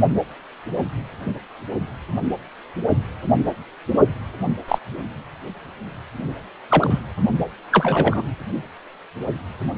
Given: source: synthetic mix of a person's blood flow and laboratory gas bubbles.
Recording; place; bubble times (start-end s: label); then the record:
Doppler ultrasound of blood flow; precordium
4.68-4.79 s: bubbles
6.70-7.00 s: bubbles
7.71-8.22 s: bubbles
From the record:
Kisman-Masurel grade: 123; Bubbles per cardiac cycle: 1 to 2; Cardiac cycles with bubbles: 10 to 50%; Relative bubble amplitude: loud (0.450 to 0.775); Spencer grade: 2 (many but less than half of the cardiac periods contain bubble signals, singularly or in groups); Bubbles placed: only in the low amplitude regions of the cardiac cycle